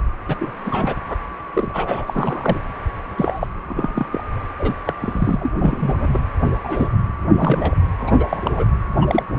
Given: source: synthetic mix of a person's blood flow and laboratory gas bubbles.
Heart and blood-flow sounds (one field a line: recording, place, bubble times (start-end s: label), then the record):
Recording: Doppler ultrasound of blood flow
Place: precordium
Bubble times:
0.00-0.02 s: bubbles
0.29-0.36 s: bubbles
0.40-0.51 s: bubbles
0.65-0.94 s: bubbles
1.09-1.18 s: bubbles
1.53-2.59 s: bubbles
3.17-3.46 s: bubbles
3.67-4.06 s: bubbles
4.12-4.23 s: bubbles
4.59-4.75 s: bubbles
4.85-4.94 s: bubbles
5.00-5.54 s: bubbles
5.58-6.19 s: bubbles
6.63-6.89 s: bubbles
7.33-7.75 s: bubbles
8.00-8.64 s: bubbles
8.96-9.23 s: bubbles
9.33-9.39 s: bubbles
From the record:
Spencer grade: 3 (all of the cardiac periods contain showers or single bubble signals, but not dominating or overriding the cardiac motion signals)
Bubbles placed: anywhere in the cardiac cycle